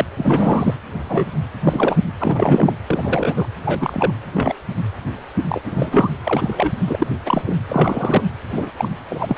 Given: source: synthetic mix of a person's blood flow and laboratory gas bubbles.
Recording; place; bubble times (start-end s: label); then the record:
Doppler ultrasound of blood flow; precordium
0.00-0.05 s: bubbles
0.17-0.74 s: bubbles
1.08-1.27 s: bubbles
1.65-1.96 s: bubbles
2.18-2.74 s: bubbles
2.87-3.48 s: bubbles
3.64-4.12 s: bubbles
4.33-4.55 s: bubbles
5.48-6.10 s: bubbles
6.23-6.73 s: bubbles
6.86-6.95 s: bubbles
6.98-7.07 s: bubbles
7.25-7.42 s: bubbles
7.46-7.56 s: bubbles
7.69-8.22 s: bubbles
8.51-8.70 s: bubbles
8.77-8.88 s: bubbles
9.09-9.37 s: bubbles
From the record:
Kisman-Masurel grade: 243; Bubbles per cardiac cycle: several, 3 to 8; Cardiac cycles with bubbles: 100%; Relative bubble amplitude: loud (0.450 to 0.775); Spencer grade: 3 (all of the cardiac periods contain showers or single bubble signals, but not dominating or overriding the cardiac motion signals); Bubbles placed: anywhere in the cardiac cycle